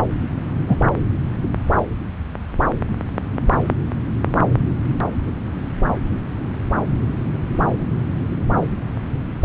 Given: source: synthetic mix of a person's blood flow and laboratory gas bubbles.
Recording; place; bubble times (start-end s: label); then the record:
Doppler ultrasound of blood flow; subclavian vein
0.67-0.76 s: bubbles
From the record:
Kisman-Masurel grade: 113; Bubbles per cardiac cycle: 1 to 2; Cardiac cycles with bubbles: 1 to 10%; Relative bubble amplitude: loud (0.450 to 0.775); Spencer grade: 1 (occasional bubble signal discernible with the cardiac motion signal, with majority of cardiac periods free of bubbles); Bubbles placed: anywhere in the cardiac cycle